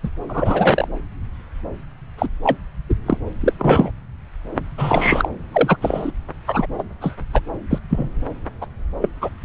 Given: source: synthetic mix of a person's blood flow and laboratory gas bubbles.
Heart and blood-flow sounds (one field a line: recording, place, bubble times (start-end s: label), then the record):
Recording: Doppler ultrasound of blood flow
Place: subclavian vein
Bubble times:
0.03-0.10 s: bubbles
0.28-0.86 s: bubbles
2.18-2.29 s: bubbles
2.43-2.56 s: bubbles
2.89-2.94 s: bubbles
3.06-3.18 s: bubbles
3.40-3.53 s: bubbles
3.58-3.91 s: bubbles
4.78-5.29 s: bubbles
5.53-5.77 s: bubbles
5.81-6.11 s: bubbles
6.46-6.66 s: bubbles
6.79-6.83 s: bubbles
7.01-7.15 s: bubbles
7.33-7.40 s: bubbles
7.70-7.79 s: bubbles
7.90-8.08 s: bubbles
8.61-8.67 s: bubbles
9.01-9.09 s: bubbles
9.21-9.29 s: bubbles
From the record:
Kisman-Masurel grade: 233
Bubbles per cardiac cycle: several, 3 to 8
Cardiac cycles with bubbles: 50 to 99%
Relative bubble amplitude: loud (0.450 to 0.775)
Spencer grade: 3 (all of the cardiac periods contain showers or single bubble signals, but not dominating or overriding the cardiac motion signals)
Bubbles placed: anywhere in the cardiac cycle